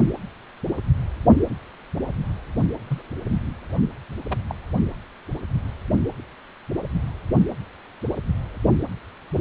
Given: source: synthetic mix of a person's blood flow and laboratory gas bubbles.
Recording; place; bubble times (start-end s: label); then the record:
Doppler ultrasound of blood flow; precordium
2.88-3.01 s: bubbles
4.29-4.38 s: bubbles
4.49-4.55 s: bubbles
From the record:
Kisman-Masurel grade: 121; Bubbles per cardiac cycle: 1 to 2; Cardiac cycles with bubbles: 10 to 50%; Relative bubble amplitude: barely perceptible (0.100 to 0.250); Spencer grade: 2 (many but less than half of the cardiac periods contain bubble signals, singularly or in groups); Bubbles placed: only in the low amplitude regions of the cardiac cycle